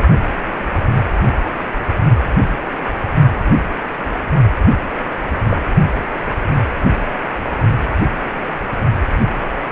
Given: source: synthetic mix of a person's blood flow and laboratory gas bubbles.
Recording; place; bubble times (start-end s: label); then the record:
Doppler ultrasound of blood flow; precordium
5.49-5.62 s: bubbles
From the record:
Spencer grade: 2 (many but less than half of the cardiac periods contain bubble signals, singularly or in groups); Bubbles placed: anywhere in the cardiac cycle